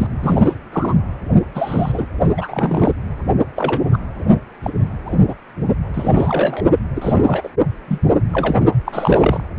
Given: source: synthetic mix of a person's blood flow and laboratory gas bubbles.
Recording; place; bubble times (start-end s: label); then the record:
Doppler ultrasound of blood flow; precordium
0.00-0.07 s: bubbles
0.20-0.55 s: bubbles
0.72-0.95 s: bubbles
1.55-2.05 s: bubbles
2.37-2.92 s: bubbles
3.56-3.98 s: bubbles
4.62-4.71 s: bubbles
5.05-5.36 s: bubbles
5.94-6.64 s: bubbles
6.96-7.49 s: bubbles
7.88-7.99 s: bubbles
8.33-8.56 s: bubbles
8.85-9.41 s: bubbles
From the record:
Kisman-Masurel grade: 232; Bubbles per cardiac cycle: several, 3 to 8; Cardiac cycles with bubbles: 50 to 99%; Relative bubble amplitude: moderate (0.250 to 0.450); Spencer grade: 3 (all of the cardiac periods contain showers or single bubble signals, but not dominating or overriding the cardiac motion signals); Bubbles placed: only in the low amplitude regions of the cardiac cycle